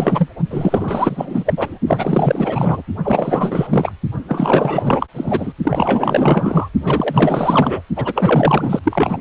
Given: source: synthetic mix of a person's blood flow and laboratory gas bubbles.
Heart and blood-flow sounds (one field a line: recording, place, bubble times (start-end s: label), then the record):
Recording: Doppler ultrasound of blood flow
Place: precordium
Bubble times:
0.00-0.29 s: bubbles
0.50-1.54 s: bubbles
1.56-1.79 s: bubbles
1.87-2.82 s: bubbles
3.03-3.92 s: bubbles
4.28-5.07 s: bubbles
5.15-5.53 s: bubbles
5.63-6.69 s: bubbles
6.83-7.82 s: bubbles
7.96-8.79 s: bubbles
8.83-9.21 s: bubbles
From the record:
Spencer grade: 4 (maximum detectable bubble signal sounding continuously throughout systole and diastole of every cardiac period, and overriding the amplitude of the normal cardiac signals)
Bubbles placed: only in the low amplitude regions of the cardiac cycle